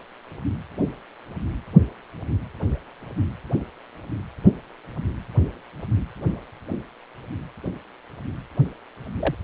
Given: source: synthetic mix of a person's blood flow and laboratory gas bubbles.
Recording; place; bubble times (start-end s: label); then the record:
Doppler ultrasound of blood flow; precordium
9.20-9.35 s: bubbles
From the record:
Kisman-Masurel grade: 111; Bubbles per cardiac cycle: 1 to 2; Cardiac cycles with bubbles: 1 to 10%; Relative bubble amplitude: barely perceptible (0.100 to 0.250); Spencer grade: 1 (occasional bubble signal discernible with the cardiac motion signal, with majority of cardiac periods free of bubbles); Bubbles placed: anywhere in the cardiac cycle